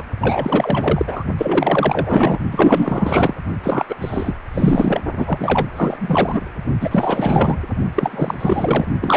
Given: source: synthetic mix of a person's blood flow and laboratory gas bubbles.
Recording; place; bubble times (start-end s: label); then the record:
Doppler ultrasound of blood flow; precordium
0.00-0.03 s: bubbles
0.20-1.24 s: bubbles
1.38-2.40 s: bubbles
2.51-3.34 s: bubbles
3.62-3.85 s: bubbles
3.89-3.96 s: bubbles
4.01-4.37 s: bubbles
4.54-5.01 s: bubbles
5.17-5.67 s: bubbles
5.76-5.97 s: bubbles
6.00-6.41 s: bubbles
6.80-7.57 s: bubbles
7.94-8.86 s: bubbles
9.01-9.17 s: bubbles
From the record:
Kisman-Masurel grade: 444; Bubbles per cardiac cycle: continuous sound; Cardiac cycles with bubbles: 100%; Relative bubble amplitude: maximal (0.775 to 0.999); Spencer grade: 4 (maximum detectable bubble signal sounding continuously throughout systole and diastole of every cardiac period, and overriding the amplitude of the normal cardiac signals); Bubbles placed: only in the low amplitude regions of the cardiac cycle